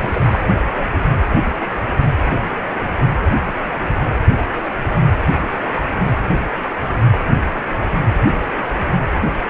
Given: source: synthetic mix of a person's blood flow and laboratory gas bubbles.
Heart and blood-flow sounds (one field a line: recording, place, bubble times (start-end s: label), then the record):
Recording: Doppler ultrasound of blood flow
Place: precordium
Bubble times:
0.00-0.44 s: bubbles
From the record:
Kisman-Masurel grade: 212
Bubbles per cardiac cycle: several, 3 to 8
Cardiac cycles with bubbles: 1 to 10%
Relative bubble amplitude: moderate (0.250 to 0.450)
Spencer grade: 1 (occasional bubble signal discernible with the cardiac motion signal, with majority of cardiac periods free of bubbles)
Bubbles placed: anywhere in the cardiac cycle